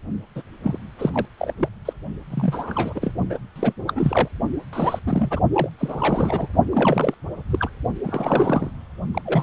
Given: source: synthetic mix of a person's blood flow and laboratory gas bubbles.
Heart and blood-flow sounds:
Doppler ultrasound of blood flow; precordium
0.35-0.42 s: bubbles
0.62-0.78 s: bubbles
0.98-1.11 s: bubbles
1.14-1.26 s: bubbles
1.38-1.53 s: bubbles
1.57-1.69 s: bubbles
1.85-1.93 s: bubbles
2.30-3.13 s: bubbles
3.29-3.38 s: bubbles
3.55-3.73 s: bubbles
3.87-4.29 s: bubbles
4.72-5.00 s: bubbles
5.05-5.39 s: bubbles
5.54-5.69 s: bubbles
5.79-6.48 s: bubbles
6.71-7.14 s: bubbles
7.50-7.69 s: bubbles
8.03-8.71 s: bubbles
9.14-9.21 s: bubbles
9.25-9.43 s: bubbles
From the record:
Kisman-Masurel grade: 342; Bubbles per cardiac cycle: rolling drumbeat, 9 or more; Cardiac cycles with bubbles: 100%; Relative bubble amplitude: moderate (0.250 to 0.450); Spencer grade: 3 (all of the cardiac periods contain showers or single bubble signals, but not dominating or overriding the cardiac motion signals); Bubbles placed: only in the low amplitude regions of the cardiac cycle

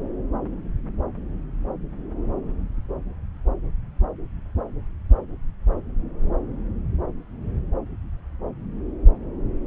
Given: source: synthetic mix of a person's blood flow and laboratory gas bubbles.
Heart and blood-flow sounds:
Doppler ultrasound of blood flow; subclavian vein
no bubbles
From the record:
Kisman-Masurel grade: 000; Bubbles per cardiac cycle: 0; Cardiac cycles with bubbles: 0%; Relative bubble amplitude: no bubbles discernible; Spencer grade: 0 (complete lack of bubble signals)

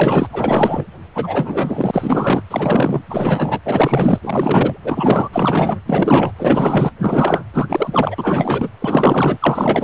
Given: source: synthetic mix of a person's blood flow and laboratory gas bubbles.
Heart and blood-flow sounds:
Doppler ultrasound of blood flow; precordium
0.00-0.29 s: bubbles
0.33-0.86 s: bubbles
1.15-2.43 s: bubbles
2.50-3.02 s: bubbles
3.10-3.60 s: bubbles
3.65-4.79 s: bubbles
4.84-5.29 s: bubbles
5.32-5.80 s: bubbles
5.86-6.32 s: bubbles
6.38-6.91 s: bubbles
7.00-7.44 s: bubbles
7.54-7.66 s: bubbles
7.68-8.70 s: bubbles
8.79-9.37 s: bubbles
9.41-9.84 s: bubbles
From the record:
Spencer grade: 4 (maximum detectable bubble signal sounding continuously throughout systole and diastole of every cardiac period, and overriding the amplitude of the normal cardiac signals); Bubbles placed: anywhere in the cardiac cycle

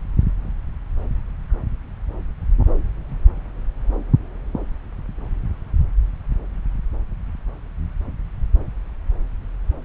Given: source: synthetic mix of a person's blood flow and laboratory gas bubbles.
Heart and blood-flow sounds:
Doppler ultrasound of blood flow; subclavian vein
no bubbles
From the record:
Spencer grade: 0 (complete lack of bubble signals)

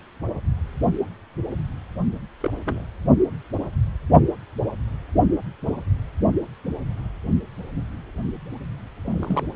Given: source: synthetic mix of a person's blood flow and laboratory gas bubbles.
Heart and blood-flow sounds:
Doppler ultrasound of blood flow; precordium
2.40-2.54 s: bubbles
2.64-2.83 s: bubbles
9.04-9.44 s: bubbles
From the record:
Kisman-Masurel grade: 121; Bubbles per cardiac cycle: 1 to 2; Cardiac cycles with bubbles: 10 to 50%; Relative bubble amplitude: barely perceptible (0.100 to 0.250); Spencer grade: 2 (many but less than half of the cardiac periods contain bubble signals, singularly or in groups); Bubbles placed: only in the low amplitude regions of the cardiac cycle

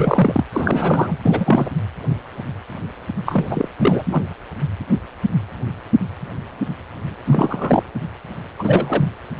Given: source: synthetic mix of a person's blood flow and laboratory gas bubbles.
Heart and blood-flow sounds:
Doppler ultrasound of blood flow; precordium
0.00-0.44 s: bubbles
0.53-1.18 s: bubbles
1.24-1.69 s: bubbles
3.25-3.68 s: bubbles
3.77-4.03 s: bubbles
4.05-4.22 s: bubbles
7.25-7.83 s: bubbles
8.58-9.11 s: bubbles
From the record:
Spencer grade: 3 (all of the cardiac periods contain showers or single bubble signals, but not dominating or overriding the cardiac motion signals); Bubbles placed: anywhere in the cardiac cycle

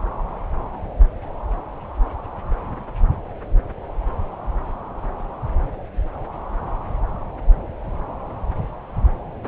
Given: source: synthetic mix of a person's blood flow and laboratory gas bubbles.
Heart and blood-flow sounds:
Doppler ultrasound of blood flow; subclavian vein
no bubbles
From the record:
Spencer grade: 0 (complete lack of bubble signals)

